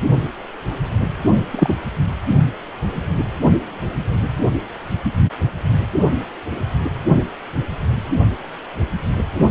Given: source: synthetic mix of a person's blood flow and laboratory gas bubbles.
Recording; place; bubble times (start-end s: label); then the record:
Doppler ultrasound of blood flow; precordium
1.51-1.75 s: bubbles
From the record:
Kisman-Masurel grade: 123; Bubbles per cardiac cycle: 1 to 2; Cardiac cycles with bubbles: 10 to 50%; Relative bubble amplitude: loud (0.450 to 0.775); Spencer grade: 2 (many but less than half of the cardiac periods contain bubble signals, singularly or in groups); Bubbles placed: only in the low amplitude regions of the cardiac cycle